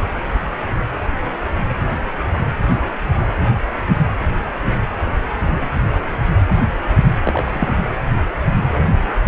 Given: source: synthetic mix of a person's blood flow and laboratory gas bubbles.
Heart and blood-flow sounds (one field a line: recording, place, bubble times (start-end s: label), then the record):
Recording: Doppler ultrasound of blood flow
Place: precordium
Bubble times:
7.25-7.74 s: bubbles
From the record:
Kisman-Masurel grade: 212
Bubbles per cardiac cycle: several, 3 to 8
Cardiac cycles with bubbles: 1 to 10%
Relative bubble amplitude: moderate (0.250 to 0.450)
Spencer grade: 1 (occasional bubble signal discernible with the cardiac motion signal, with majority of cardiac periods free of bubbles)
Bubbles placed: anywhere in the cardiac cycle